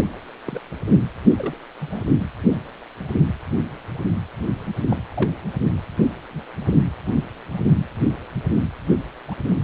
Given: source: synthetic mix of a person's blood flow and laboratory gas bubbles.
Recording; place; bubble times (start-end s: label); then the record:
Doppler ultrasound of blood flow; precordium
0.45-0.61 s: bubbles
1.38-1.56 s: bubbles
1.79-2.02 s: bubbles
4.88-4.98 s: bubbles
5.12-5.29 s: bubbles
9.28-9.35 s: bubbles
From the record:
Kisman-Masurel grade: 121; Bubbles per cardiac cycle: 1 to 2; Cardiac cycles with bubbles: 10 to 50%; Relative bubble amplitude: barely perceptible (0.100 to 0.250); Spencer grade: 2 (many but less than half of the cardiac periods contain bubble signals, singularly or in groups); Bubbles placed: anywhere in the cardiac cycle